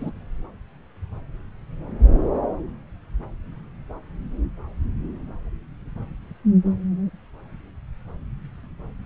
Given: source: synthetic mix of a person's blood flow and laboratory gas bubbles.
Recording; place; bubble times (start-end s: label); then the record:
Doppler ultrasound of blood flow; subclavian vein
0.00-0.11 s: bubbles
From the record:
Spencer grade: 1 (occasional bubble signal discernible with the cardiac motion signal, with majority of cardiac periods free of bubbles); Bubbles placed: anywhere in the cardiac cycle